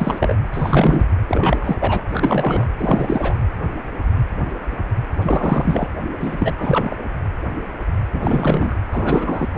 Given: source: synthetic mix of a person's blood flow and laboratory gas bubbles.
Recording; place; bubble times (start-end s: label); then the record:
Doppler ultrasound of blood flow; precordium
0.00-0.35 s: bubbles
0.52-1.05 s: bubbles
1.28-1.76 s: bubbles
1.79-2.03 s: bubbles
2.11-2.68 s: bubbles
2.78-3.35 s: bubbles
5.21-5.88 s: bubbles
6.20-6.96 s: bubbles
8.12-8.77 s: bubbles
8.92-9.48 s: bubbles
9.53-9.58 s: bubbles
From the record:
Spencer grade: 3 (all of the cardiac periods contain showers or single bubble signals, but not dominating or overriding the cardiac motion signals); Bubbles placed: anywhere in the cardiac cycle